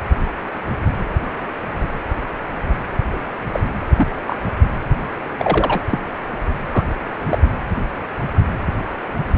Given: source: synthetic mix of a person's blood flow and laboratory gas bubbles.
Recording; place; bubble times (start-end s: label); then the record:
Doppler ultrasound of blood flow; precordium
3.12-3.17 s: bubbles
3.52-3.60 s: bubbles
3.96-4.08 s: bubbles
4.26-4.37 s: bubbles
5.38-5.83 s: bubbles
5.92-5.99 s: bubbles
6.71-6.84 s: bubbles
7.25-7.38 s: bubbles
From the record:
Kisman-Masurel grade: 122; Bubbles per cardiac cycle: 1 to 2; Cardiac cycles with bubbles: 10 to 50%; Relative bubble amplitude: moderate (0.250 to 0.450); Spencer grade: 2 (many but less than half of the cardiac periods contain bubble signals, singularly or in groups); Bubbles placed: anywhere in the cardiac cycle